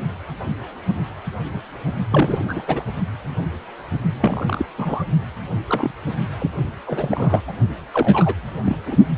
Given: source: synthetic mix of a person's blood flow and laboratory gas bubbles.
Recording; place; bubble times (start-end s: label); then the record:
Doppler ultrasound of blood flow; precordium
2.10-2.62 s: bubbles
2.67-2.83 s: bubbles
4.17-4.65 s: bubbles
4.78-5.03 s: bubbles
5.68-5.92 s: bubbles
6.39-6.50 s: bubbles
6.87-7.42 s: bubbles
7.48-7.52 s: bubbles
7.92-8.34 s: bubbles
8.62-8.78 s: bubbles
8.87-8.97 s: bubbles
From the record:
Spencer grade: 3 (all of the cardiac periods contain showers or single bubble signals, but not dominating or overriding the cardiac motion signals); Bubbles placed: only in the low amplitude regions of the cardiac cycle